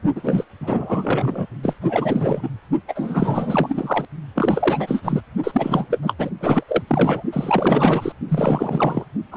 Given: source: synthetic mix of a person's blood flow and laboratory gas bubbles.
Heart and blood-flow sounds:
Doppler ultrasound of blood flow; precordium
0.15-0.45 s: bubbles
0.60-1.47 s: bubbles
1.63-1.76 s: bubbles
1.81-2.48 s: bubbles
2.88-4.05 s: bubbles
4.35-5.21 s: bubbles
5.43-5.87 s: bubbles
5.91-5.98 s: bubbles
6.02-6.13 s: bubbles
6.18-6.30 s: bubbles
6.41-6.63 s: bubbles
6.68-6.82 s: bubbles
6.87-7.23 s: bubbles
7.33-8.12 s: bubbles
8.28-9.06 s: bubbles
9.31-9.37 s: bubbles
From the record:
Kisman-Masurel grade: 444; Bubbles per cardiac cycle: continuous sound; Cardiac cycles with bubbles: 100%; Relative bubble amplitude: maximal (0.775 to 0.999); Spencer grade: 4 (maximum detectable bubble signal sounding continuously throughout systole and diastole of every cardiac period, and overriding the amplitude of the normal cardiac signals); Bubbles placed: only in the low amplitude regions of the cardiac cycle

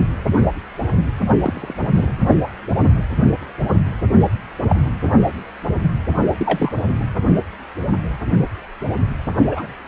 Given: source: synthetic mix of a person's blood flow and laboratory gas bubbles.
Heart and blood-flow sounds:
Doppler ultrasound of blood flow; precordium
1.41-1.75 s: bubbles
1.94-2.07 s: bubbles
4.69-4.79 s: bubbles
6.37-6.83 s: bubbles
9.51-9.67 s: bubbles
From the record:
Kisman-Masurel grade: 122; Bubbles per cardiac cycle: 1 to 2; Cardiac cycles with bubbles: 10 to 50%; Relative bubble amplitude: moderate (0.250 to 0.450); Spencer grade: 2 (many but less than half of the cardiac periods contain bubble signals, singularly or in groups); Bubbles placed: only in the low amplitude regions of the cardiac cycle

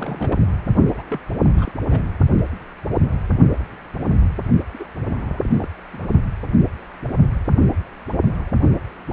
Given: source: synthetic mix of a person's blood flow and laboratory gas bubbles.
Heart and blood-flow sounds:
Doppler ultrasound of blood flow; precordium
0.00-0.41 s: bubbles
0.85-1.04 s: bubbles
1.10-1.20 s: bubbles
1.42-1.48 s: bubbles
1.58-1.73 s: bubbles
1.83-2.09 s: bubbles
4.73-4.86 s: bubbles
5.05-5.40 s: bubbles
5.42-5.67 s: bubbles
5.93-6.07 s: bubbles
From the record:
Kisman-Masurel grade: 221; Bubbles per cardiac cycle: several, 3 to 8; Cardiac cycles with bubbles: 10 to 50%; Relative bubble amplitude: barely perceptible (0.100 to 0.250); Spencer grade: 2 (many but less than half of the cardiac periods contain bubble signals, singularly or in groups); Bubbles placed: only in the low amplitude regions of the cardiac cycle

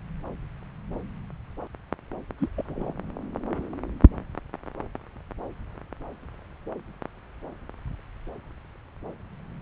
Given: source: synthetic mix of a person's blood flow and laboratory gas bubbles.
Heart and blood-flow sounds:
Doppler ultrasound of blood flow; subclavian vein
2.39-2.49 s: bubbles
2.57-2.62 s: bubbles
2.66-2.94 s: bubbles
From the record:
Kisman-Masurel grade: 121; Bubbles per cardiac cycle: 1 to 2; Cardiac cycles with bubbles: 10 to 50%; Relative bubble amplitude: barely perceptible (0.100 to 0.250); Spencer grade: 2 (many but less than half of the cardiac periods contain bubble signals, singularly or in groups); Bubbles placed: anywhere in the cardiac cycle

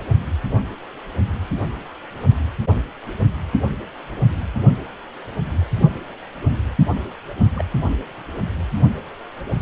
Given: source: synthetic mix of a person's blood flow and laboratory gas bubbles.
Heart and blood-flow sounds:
Doppler ultrasound of blood flow; precordium
7.56-7.65 s: bubbles
From the record:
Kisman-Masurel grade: 121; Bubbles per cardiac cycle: 1 to 2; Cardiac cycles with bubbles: 10 to 50%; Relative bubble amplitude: barely perceptible (0.100 to 0.250); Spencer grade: 2 (many but less than half of the cardiac periods contain bubble signals, singularly or in groups); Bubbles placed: only in the low amplitude regions of the cardiac cycle

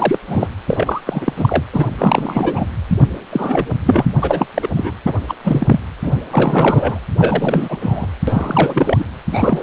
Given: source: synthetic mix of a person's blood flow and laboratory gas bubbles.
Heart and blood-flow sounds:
Doppler ultrasound of blood flow; precordium
0.00-0.19 s: bubbles
0.27-0.48 s: bubbles
0.67-1.01 s: bubbles
1.05-1.33 s: bubbles
1.36-1.63 s: bubbles
1.73-1.87 s: bubbles
1.98-2.66 s: bubbles
2.90-3.06 s: bubbles
3.31-3.67 s: bubbles
3.84-4.13 s: bubbles
4.22-4.47 s: bubbles
4.54-4.70 s: bubbles
4.74-4.92 s: bubbles
5.05-5.13 s: bubbles
5.28-5.34 s: bubbles
5.43-5.79 s: bubbles
6.03-6.26 s: bubbles
6.30-7.00 s: bubbles
7.17-8.07 s: bubbles
8.27-9.05 s: bubbles
9.31-9.62 s: bubbles
From the record:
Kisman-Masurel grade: 333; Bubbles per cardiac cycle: rolling drumbeat, 9 or more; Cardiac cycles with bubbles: 50 to 99%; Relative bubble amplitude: loud (0.450 to 0.775); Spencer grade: 3 (all of the cardiac periods contain showers or single bubble signals, but not dominating or overriding the cardiac motion signals); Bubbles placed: anywhere in the cardiac cycle

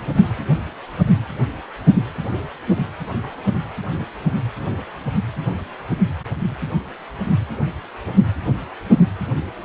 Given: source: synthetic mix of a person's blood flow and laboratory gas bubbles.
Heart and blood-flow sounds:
Doppler ultrasound of blood flow; precordium
3.20-3.27 s: bubbles
3.44-3.55 s: bubbles
From the record:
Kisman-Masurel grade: 111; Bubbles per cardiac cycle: 1 to 2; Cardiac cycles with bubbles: 1 to 10%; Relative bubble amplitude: barely perceptible (0.100 to 0.250); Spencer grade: 1 (occasional bubble signal discernible with the cardiac motion signal, with majority of cardiac periods free of bubbles); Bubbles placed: anywhere in the cardiac cycle

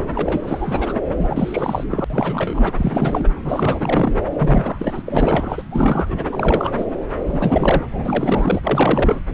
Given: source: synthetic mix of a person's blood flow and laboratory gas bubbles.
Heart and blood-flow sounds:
Doppler ultrasound of blood flow; subclavian vein
0.15-0.99 s: bubbles
1.19-1.84 s: bubbles
1.90-2.04 s: bubbles
2.10-3.29 s: bubbles
3.45-4.11 s: bubbles
4.38-5.02 s: bubbles
5.06-5.62 s: bubbles
5.71-6.25 s: bubbles
6.31-6.72 s: bubbles
6.77-6.85 s: bubbles
7.22-7.85 s: bubbles
7.92-8.62 s: bubbles
8.65-9.20 s: bubbles
From the record:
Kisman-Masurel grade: 342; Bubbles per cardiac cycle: rolling drumbeat, 9 or more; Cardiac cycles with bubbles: 100%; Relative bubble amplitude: moderate (0.250 to 0.450); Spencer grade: 3 (all of the cardiac periods contain showers or single bubble signals, but not dominating or overriding the cardiac motion signals); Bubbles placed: anywhere in the cardiac cycle

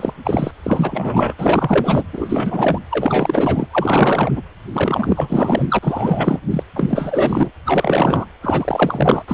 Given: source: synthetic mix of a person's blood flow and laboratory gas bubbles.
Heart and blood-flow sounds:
Doppler ultrasound of blood flow; precordium
0.00-0.14 s: bubbles
0.24-0.51 s: bubbles
0.63-1.34 s: bubbles
1.38-2.04 s: bubbles
2.12-2.79 s: bubbles
2.90-3.68 s: bubbles
3.71-4.42 s: bubbles
4.73-5.79 s: bubbles
5.82-6.40 s: bubbles
6.50-6.63 s: bubbles
6.76-7.51 s: bubbles
7.66-8.26 s: bubbles
8.42-9.23 s: bubbles
9.28-9.34 s: bubbles
From the record:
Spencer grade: 4 (maximum detectable bubble signal sounding continuously throughout systole and diastole of every cardiac period, and overriding the amplitude of the normal cardiac signals); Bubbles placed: anywhere in the cardiac cycle

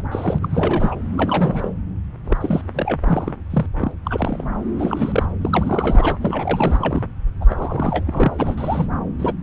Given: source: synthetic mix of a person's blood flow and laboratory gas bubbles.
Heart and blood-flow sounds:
Doppler ultrasound of blood flow; subclavian vein
0.00-0.39 s: bubbles
0.41-0.95 s: bubbles
1.17-1.70 s: bubbles
2.24-2.38 s: bubbles
2.40-2.61 s: bubbles
2.74-3.00 s: bubbles
3.04-3.35 s: bubbles
3.50-3.67 s: bubbles
3.79-3.92 s: bubbles
4.05-4.44 s: bubbles
4.79-5.26 s: bubbles
5.41-6.17 s: bubbles
6.21-7.02 s: bubbles
7.41-7.45 s: bubbles
7.49-8.28 s: bubbles
8.37-8.87 s: bubbles
9.19-9.33 s: bubbles
From the record:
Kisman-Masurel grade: 342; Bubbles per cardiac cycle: rolling drumbeat, 9 or more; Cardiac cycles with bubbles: 100%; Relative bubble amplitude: moderate (0.250 to 0.450); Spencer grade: 3 (all of the cardiac periods contain showers or single bubble signals, but not dominating or overriding the cardiac motion signals); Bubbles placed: anywhere in the cardiac cycle

